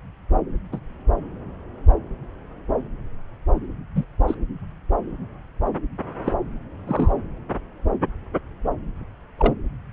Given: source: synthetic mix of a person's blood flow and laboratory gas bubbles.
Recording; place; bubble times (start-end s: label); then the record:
Doppler ultrasound of blood flow; subclavian vein
0.72-0.79 s: bubbles
3.95-4.05 s: bubbles
4.27-4.35 s: bubbles
6.24-6.33 s: bubbles
6.87-7.12 s: bubbles
9.38-9.54 s: bubbles
From the record:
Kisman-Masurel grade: 122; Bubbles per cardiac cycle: 1 to 2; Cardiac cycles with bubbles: 10 to 50%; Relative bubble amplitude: moderate (0.250 to 0.450); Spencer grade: 2 (many but less than half of the cardiac periods contain bubble signals, singularly or in groups); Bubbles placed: anywhere in the cardiac cycle